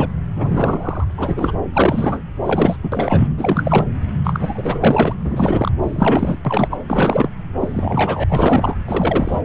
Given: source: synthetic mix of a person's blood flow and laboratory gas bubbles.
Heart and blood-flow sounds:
Doppler ultrasound of blood flow; subclavian vein
0.00-0.08 s: bubbles
0.36-1.05 s: bubbles
1.08-1.11 s: bubbles
1.17-1.52 s: bubbles
1.73-2.21 s: bubbles
2.43-2.76 s: bubbles
2.83-2.89 s: bubbles
2.92-3.28 s: bubbles
3.38-3.86 s: bubbles
4.24-4.79 s: bubbles
4.81-5.13 s: bubbles
5.25-5.71 s: bubbles
5.83-6.37 s: bubbles
6.45-6.77 s: bubbles
6.88-7.29 s: bubbles
7.58-8.24 s: bubbles
8.29-8.77 s: bubbles
8.85-9.39 s: bubbles
From the record:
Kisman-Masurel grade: 343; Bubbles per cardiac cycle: rolling drumbeat, 9 or more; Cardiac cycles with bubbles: 100%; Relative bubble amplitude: loud (0.450 to 0.775); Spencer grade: 3 (all of the cardiac periods contain showers or single bubble signals, but not dominating or overriding the cardiac motion signals); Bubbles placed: anywhere in the cardiac cycle

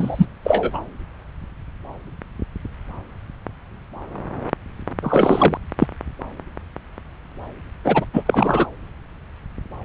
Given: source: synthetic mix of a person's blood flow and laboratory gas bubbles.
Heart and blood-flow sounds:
Doppler ultrasound of blood flow; subclavian vein
0.00-0.27 s: bubbles
0.44-0.82 s: bubbles
5.03-5.57 s: bubbles
5.79-5.87 s: bubbles
7.84-8.05 s: bubbles
8.13-8.68 s: bubbles
From the record:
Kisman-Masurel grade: 223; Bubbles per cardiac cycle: several, 3 to 8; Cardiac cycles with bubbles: 10 to 50%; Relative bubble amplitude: loud (0.450 to 0.775); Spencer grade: 2 (many but less than half of the cardiac periods contain bubble signals, singularly or in groups); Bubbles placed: anywhere in the cardiac cycle

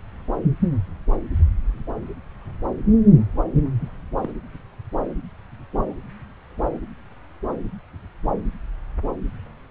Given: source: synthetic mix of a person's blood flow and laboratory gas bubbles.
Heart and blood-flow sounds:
Doppler ultrasound of blood flow; subclavian vein
3.81-3.88 s: bubbles
4.19-4.33 s: bubbles
From the record:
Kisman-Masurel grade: 111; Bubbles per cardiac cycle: 1 to 2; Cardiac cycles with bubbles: 1 to 10%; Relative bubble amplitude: barely perceptible (0.100 to 0.250); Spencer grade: 1 (occasional bubble signal discernible with the cardiac motion signal, with majority of cardiac periods free of bubbles); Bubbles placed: anywhere in the cardiac cycle

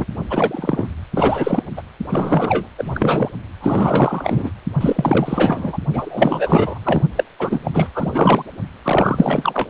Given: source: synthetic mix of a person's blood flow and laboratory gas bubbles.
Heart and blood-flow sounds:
Doppler ultrasound of blood flow; precordium
0.00-0.06 s: bubbles
0.29-0.88 s: bubbles
1.13-1.63 s: bubbles
1.77-1.83 s: bubbles
2.09-2.67 s: bubbles
2.78-3.31 s: bubbles
3.60-4.50 s: bubbles
4.80-5.78 s: bubbles
5.92-6.79 s: bubbles
6.83-7.02 s: bubbles
7.17-7.24 s: bubbles
7.38-7.71 s: bubbles
7.74-7.90 s: bubbles
7.93-8.45 s: bubbles
8.84-9.69 s: bubbles
From the record:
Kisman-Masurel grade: 444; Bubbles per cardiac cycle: continuous sound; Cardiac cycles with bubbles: 100%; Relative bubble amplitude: maximal (0.775 to 0.999); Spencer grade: 4 (maximum detectable bubble signal sounding continuously throughout systole and diastole of every cardiac period, and overriding the amplitude of the normal cardiac signals); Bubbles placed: only in the low amplitude regions of the cardiac cycle

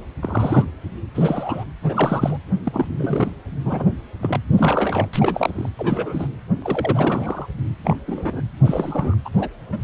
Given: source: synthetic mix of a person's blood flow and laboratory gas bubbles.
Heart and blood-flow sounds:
Doppler ultrasound of blood flow; precordium
0.20-0.65 s: bubbles
1.14-1.65 s: bubbles
1.82-2.38 s: bubbles
2.64-2.87 s: bubbles
2.99-3.30 s: bubbles
3.65-3.92 s: bubbles
4.22-4.40 s: bubbles
4.57-5.09 s: bubbles
5.13-5.69 s: bubbles
5.78-6.27 s: bubbles
6.62-7.46 s: bubbles
7.83-7.97 s: bubbles
8.06-8.42 s: bubbles
8.62-9.15 s: bubbles
9.25-9.29 s: bubbles
9.35-9.49 s: bubbles
9.72-9.79 s: bubbles
From the record:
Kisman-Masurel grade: 232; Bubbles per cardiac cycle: several, 3 to 8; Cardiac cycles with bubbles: 50 to 99%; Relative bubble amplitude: moderate (0.250 to 0.450); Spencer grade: 3 (all of the cardiac periods contain showers or single bubble signals, but not dominating or overriding the cardiac motion signals); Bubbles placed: anywhere in the cardiac cycle

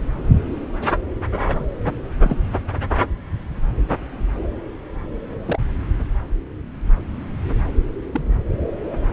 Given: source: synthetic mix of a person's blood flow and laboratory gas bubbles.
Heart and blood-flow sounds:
Doppler ultrasound of blood flow; subclavian vein
1.43-1.66 s: bubbles
2.22-2.37 s: bubbles
5.45-5.59 s: bubbles
8.12-8.24 s: bubbles
From the record:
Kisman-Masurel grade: 121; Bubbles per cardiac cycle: 1 to 2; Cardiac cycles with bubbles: 10 to 50%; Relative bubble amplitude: barely perceptible (0.100 to 0.250); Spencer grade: 2 (many but less than half of the cardiac periods contain bubble signals, singularly or in groups); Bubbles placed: anywhere in the cardiac cycle

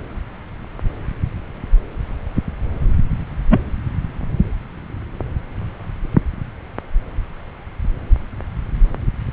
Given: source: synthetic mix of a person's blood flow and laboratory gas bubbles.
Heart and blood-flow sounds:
Doppler ultrasound of blood flow; subclavian vein
3.50-3.61 s: bubbles
From the record:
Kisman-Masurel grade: 113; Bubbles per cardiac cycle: 1 to 2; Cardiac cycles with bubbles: 1 to 10%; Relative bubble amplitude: loud (0.450 to 0.775); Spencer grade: 1 (occasional bubble signal discernible with the cardiac motion signal, with majority of cardiac periods free of bubbles); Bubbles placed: anywhere in the cardiac cycle

